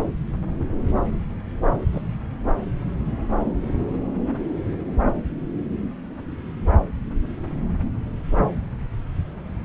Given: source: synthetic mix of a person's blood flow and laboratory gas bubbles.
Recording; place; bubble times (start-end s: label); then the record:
Doppler ultrasound of blood flow; subclavian vein
1.92-2.02 s: bubbles
From the record:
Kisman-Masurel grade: 111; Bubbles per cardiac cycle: 1 to 2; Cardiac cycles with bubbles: 1 to 10%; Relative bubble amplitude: barely perceptible (0.100 to 0.250); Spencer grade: 1 (occasional bubble signal discernible with the cardiac motion signal, with majority of cardiac periods free of bubbles); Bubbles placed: anywhere in the cardiac cycle